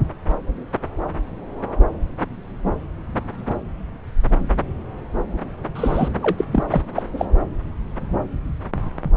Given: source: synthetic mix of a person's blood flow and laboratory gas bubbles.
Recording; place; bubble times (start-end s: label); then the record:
Doppler ultrasound of blood flow; subclavian vein
5.74-6.09 s: bubbles
6.22-6.45 s: bubbles
6.52-6.63 s: bubbles
6.71-6.82 s: bubbles
6.98-7.03 s: bubbles
7.18-7.26 s: bubbles
From the record:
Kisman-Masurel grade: 222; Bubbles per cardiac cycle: several, 3 to 8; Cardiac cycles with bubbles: 10 to 50%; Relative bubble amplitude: moderate (0.250 to 0.450); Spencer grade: 2 (many but less than half of the cardiac periods contain bubble signals, singularly or in groups); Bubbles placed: anywhere in the cardiac cycle